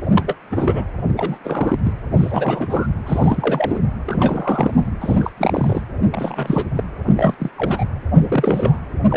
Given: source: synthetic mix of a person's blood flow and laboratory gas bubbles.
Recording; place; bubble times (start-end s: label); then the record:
Doppler ultrasound of blood flow; precordium
0.15-0.34 s: bubbles
0.52-0.84 s: bubbles
1.16-1.38 s: bubbles
1.44-1.79 s: bubbles
1.84-1.92 s: bubbles
2.17-2.88 s: bubbles
3.06-3.80 s: bubbles
4.06-4.88 s: bubbles
5.00-5.31 s: bubbles
5.38-5.82 s: bubbles
6.12-6.67 s: bubbles
6.75-6.83 s: bubbles
7.05-7.34 s: bubbles
7.39-7.51 s: bubbles
7.56-7.85 s: bubbles
8.13-8.79 s: bubbles
9.09-9.17 s: bubbles
From the record:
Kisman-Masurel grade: 332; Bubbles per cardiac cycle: rolling drumbeat, 9 or more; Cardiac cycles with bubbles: 50 to 99%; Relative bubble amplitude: moderate (0.250 to 0.450); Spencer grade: 3 (all of the cardiac periods contain showers or single bubble signals, but not dominating or overriding the cardiac motion signals); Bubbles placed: anywhere in the cardiac cycle